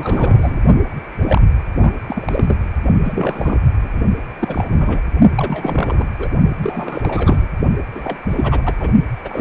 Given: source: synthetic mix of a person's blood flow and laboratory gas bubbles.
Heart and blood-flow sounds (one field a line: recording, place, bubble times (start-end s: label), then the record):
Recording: Doppler ultrasound of blood flow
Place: precordium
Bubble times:
0.00-0.61 s: bubbles
1.09-1.44 s: bubbles
1.81-1.92 s: bubbles
2.06-2.56 s: bubbles
3.04-3.58 s: bubbles
3.84-4.00 s: bubbles
4.39-5.01 s: bubbles
5.35-6.07 s: bubbles
6.18-6.28 s: bubbles
6.62-7.50 s: bubbles
7.94-8.19 s: bubbles
8.29-8.74 s: bubbles
8.79-8.90 s: bubbles
9.25-9.41 s: bubbles
From the record:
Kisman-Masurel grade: 342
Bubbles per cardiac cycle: rolling drumbeat, 9 or more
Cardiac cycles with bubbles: 100%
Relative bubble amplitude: moderate (0.250 to 0.450)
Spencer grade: 3 (all of the cardiac periods contain showers or single bubble signals, but not dominating or overriding the cardiac motion signals)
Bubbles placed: only in the low amplitude regions of the cardiac cycle